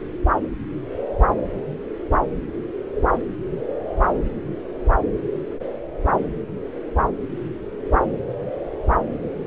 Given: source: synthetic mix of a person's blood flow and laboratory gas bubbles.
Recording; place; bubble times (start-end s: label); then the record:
Doppler ultrasound of blood flow; subclavian vein
no bubbles
From the record:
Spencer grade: 0 (complete lack of bubble signals)